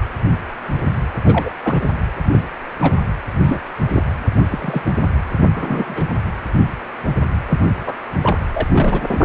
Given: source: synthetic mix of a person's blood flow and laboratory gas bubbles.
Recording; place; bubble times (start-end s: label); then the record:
Doppler ultrasound of blood flow; precordium
1.25-1.54 s: bubbles
1.62-1.88 s: bubbles
2.29-2.41 s: bubbles
2.81-2.94 s: bubbles
3.44-3.59 s: bubbles
3.93-4.03 s: bubbles
4.51-5.07 s: bubbles
5.38-5.45 s: bubbles
5.54-6.04 s: bubbles
7.49-7.59 s: bubbles
7.77-7.96 s: bubbles
8.21-8.38 s: bubbles
8.53-8.67 s: bubbles
8.72-9.01 s: bubbles
9.08-9.25 s: bubbles
From the record:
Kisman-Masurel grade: 232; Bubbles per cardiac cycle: several, 3 to 8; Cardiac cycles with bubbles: 50 to 99%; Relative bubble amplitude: moderate (0.250 to 0.450); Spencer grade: 3 (all of the cardiac periods contain showers or single bubble signals, but not dominating or overriding the cardiac motion signals); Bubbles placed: anywhere in the cardiac cycle